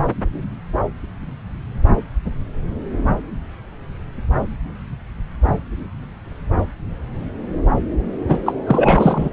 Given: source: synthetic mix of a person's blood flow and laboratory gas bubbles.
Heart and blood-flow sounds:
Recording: Doppler ultrasound of blood flow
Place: subclavian vein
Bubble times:
8.27-8.38 s: bubbles
8.46-8.54 s: bubbles
8.66-9.29 s: bubbles
From the record:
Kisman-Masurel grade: 213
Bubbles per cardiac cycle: several, 3 to 8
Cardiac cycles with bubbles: 1 to 10%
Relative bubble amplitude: loud (0.450 to 0.775)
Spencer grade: 1 (occasional bubble signal discernible with the cardiac motion signal, with majority of cardiac periods free of bubbles)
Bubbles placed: anywhere in the cardiac cycle

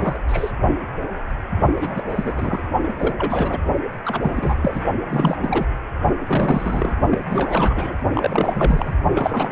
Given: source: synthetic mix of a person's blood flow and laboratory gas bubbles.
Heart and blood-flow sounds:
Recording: Doppler ultrasound of blood flow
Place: precordium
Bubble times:
0.00-0.19 s: bubbles
0.27-0.52 s: bubbles
1.80-2.04 s: bubbles
2.10-2.60 s: bubbles
2.83-2.94 s: bubbles
2.99-3.58 s: bubbles
4.04-4.84 s: bubbles
5.09-5.37 s: bubbles
5.40-5.67 s: bubbles
6.27-6.95 s: bubbles
7.09-7.97 s: bubbles
8.13-8.93 s: bubbles
9.15-9.52 s: bubbles
From the record:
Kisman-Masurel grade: 332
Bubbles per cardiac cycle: rolling drumbeat, 9 or more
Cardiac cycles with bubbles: 50 to 99%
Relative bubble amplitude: moderate (0.250 to 0.450)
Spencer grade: 3 (all of the cardiac periods contain showers or single bubble signals, but not dominating or overriding the cardiac motion signals)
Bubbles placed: only in the low amplitude regions of the cardiac cycle

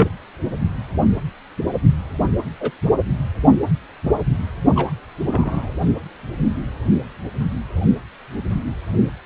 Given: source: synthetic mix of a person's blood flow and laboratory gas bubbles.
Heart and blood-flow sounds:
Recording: Doppler ultrasound of blood flow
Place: precordium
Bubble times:
0.00-0.08 s: bubbles
2.60-2.71 s: bubbles
4.76-4.92 s: bubbles
5.27-5.70 s: bubbles
From the record:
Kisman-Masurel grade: 122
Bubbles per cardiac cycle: 1 to 2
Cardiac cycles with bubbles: 10 to 50%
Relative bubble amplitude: moderate (0.250 to 0.450)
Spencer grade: 2 (many but less than half of the cardiac periods contain bubble signals, singularly or in groups)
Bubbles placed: anywhere in the cardiac cycle

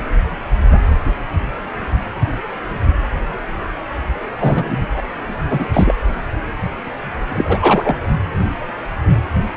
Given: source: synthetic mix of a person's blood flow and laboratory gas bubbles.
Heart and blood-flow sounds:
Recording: Doppler ultrasound of blood flow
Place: precordium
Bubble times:
4.39-4.87 s: bubbles
4.96-5.02 s: bubbles
5.49-5.69 s: bubbles
5.73-5.95 s: bubbles
7.29-7.58 s: bubbles
7.61-7.96 s: bubbles
From the record:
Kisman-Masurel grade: 223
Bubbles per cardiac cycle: several, 3 to 8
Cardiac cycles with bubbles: 10 to 50%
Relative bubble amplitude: loud (0.450 to 0.775)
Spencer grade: 2 (many but less than half of the cardiac periods contain bubble signals, singularly or in groups)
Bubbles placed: anywhere in the cardiac cycle

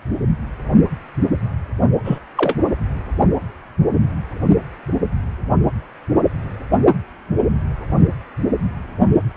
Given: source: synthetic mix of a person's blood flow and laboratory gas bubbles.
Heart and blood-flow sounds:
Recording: Doppler ultrasound of blood flow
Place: precordium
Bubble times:
2.04-2.19 s: bubbles
2.37-2.55 s: bubbles
From the record:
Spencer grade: 2 (many but less than half of the cardiac periods contain bubble signals, singularly or in groups)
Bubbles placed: only in the low amplitude regions of the cardiac cycle

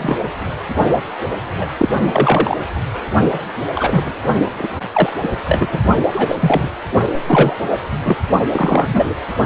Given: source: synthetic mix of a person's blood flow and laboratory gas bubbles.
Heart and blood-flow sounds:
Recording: Doppler ultrasound of blood flow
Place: precordium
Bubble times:
0.00-0.16 s: bubbles
1.57-1.68 s: bubbles
1.77-1.89 s: bubbles
2.12-2.57 s: bubbles
3.74-4.12 s: bubbles
4.58-4.68 s: bubbles
4.93-5.09 s: bubbles
5.23-5.28 s: bubbles
5.47-5.69 s: bubbles
5.72-5.79 s: bubbles
6.11-6.36 s: bubbles
6.40-6.69 s: bubbles
7.26-7.57 s: bubbles
7.70-7.79 s: bubbles
8.04-8.16 s: bubbles
8.51-9.15 s: bubbles
From the record:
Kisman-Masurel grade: 243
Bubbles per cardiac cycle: several, 3 to 8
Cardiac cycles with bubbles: 100%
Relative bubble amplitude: loud (0.450 to 0.775)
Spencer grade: 3 (all of the cardiac periods contain showers or single bubble signals, but not dominating or overriding the cardiac motion signals)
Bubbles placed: only in the low amplitude regions of the cardiac cycle

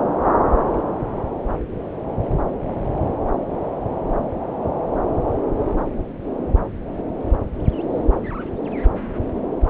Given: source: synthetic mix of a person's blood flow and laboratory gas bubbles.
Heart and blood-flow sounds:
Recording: Doppler ultrasound of blood flow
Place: subclavian vein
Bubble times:
no bubbles
From the record:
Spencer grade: 0 (complete lack of bubble signals)

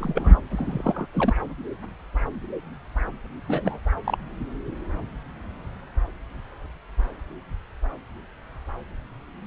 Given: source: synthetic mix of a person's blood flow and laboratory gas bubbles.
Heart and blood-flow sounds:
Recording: Doppler ultrasound of blood flow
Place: subclavian vein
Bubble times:
0.00-0.36 s: bubbles
0.51-1.06 s: bubbles
1.14-1.33 s: bubbles
3.47-3.79 s: bubbles
4.04-4.18 s: bubbles
From the record:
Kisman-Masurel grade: 222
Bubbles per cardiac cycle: several, 3 to 8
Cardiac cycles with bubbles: 10 to 50%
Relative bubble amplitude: moderate (0.250 to 0.450)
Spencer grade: 2 (many but less than half of the cardiac periods contain bubble signals, singularly or in groups)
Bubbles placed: anywhere in the cardiac cycle

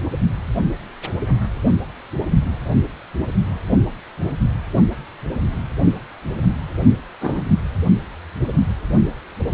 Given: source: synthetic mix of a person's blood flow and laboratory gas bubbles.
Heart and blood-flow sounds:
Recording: Doppler ultrasound of blood flow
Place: precordium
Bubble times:
7.21-7.42 s: bubbles
From the record:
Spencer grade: 1 (occasional bubble signal discernible with the cardiac motion signal, with majority of cardiac periods free of bubbles)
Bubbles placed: only in the low amplitude regions of the cardiac cycle

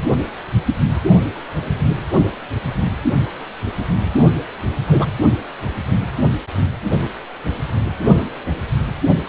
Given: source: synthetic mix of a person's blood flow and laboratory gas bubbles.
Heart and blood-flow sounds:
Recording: Doppler ultrasound of blood flow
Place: precordium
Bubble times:
4.88-5.06 s: bubbles
From the record:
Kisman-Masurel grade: 113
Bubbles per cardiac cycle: 1 to 2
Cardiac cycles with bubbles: 1 to 10%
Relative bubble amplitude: loud (0.450 to 0.775)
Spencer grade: 1 (occasional bubble signal discernible with the cardiac motion signal, with majority of cardiac periods free of bubbles)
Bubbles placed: anywhere in the cardiac cycle

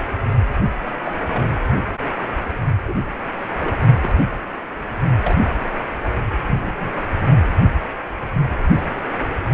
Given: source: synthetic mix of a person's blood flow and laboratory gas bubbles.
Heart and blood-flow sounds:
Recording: Doppler ultrasound of blood flow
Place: precordium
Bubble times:
1.04-1.11 s: bubbles
1.33-1.46 s: bubbles
2.88-2.94 s: bubbles
3.60-3.75 s: bubbles
4.03-4.15 s: bubbles
5.23-5.36 s: bubbles
6.54-6.98 s: bubbles
From the record:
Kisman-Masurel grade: 122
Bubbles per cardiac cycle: 1 to 2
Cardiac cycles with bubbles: 10 to 50%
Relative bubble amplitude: moderate (0.250 to 0.450)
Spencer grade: 2 (many but less than half of the cardiac periods contain bubble signals, singularly or in groups)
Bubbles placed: anywhere in the cardiac cycle

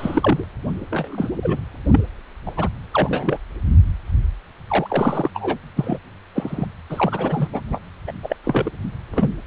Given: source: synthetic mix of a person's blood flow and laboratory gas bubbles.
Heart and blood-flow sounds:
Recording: Doppler ultrasound of blood flow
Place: precordium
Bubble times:
0.00-0.44 s: bubbles
0.90-1.29 s: bubbles
1.42-1.60 s: bubbles
1.92-2.00 s: bubbles
2.46-2.52 s: bubbles
2.56-2.69 s: bubbles
2.93-3.38 s: bubbles
4.67-5.30 s: bubbles
5.33-5.58 s: bubbles
5.75-5.98 s: bubbles
6.35-6.66 s: bubbles
6.89-7.47 s: bubbles
7.52-7.61 s: bubbles
7.70-7.80 s: bubbles
8.07-8.12 s: bubbles
8.22-8.37 s: bubbles
8.44-8.71 s: bubbles
9.11-9.30 s: bubbles
From the record:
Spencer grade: 3 (all of the cardiac periods contain showers or single bubble signals, but not dominating or overriding the cardiac motion signals)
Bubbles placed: anywhere in the cardiac cycle

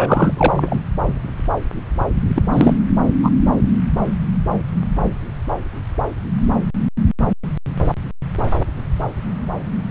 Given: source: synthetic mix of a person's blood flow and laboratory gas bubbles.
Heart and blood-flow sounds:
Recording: Doppler ultrasound of blood flow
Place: subclavian vein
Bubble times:
0.00-0.80 s: bubbles
2.35-2.47 s: bubbles
2.52-2.77 s: bubbles
3.23-3.31 s: bubbles
From the record:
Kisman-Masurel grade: 223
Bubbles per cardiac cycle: several, 3 to 8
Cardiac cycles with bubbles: 10 to 50%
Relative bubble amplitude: loud (0.450 to 0.775)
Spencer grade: 2 (many but less than half of the cardiac periods contain bubble signals, singularly or in groups)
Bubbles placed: anywhere in the cardiac cycle

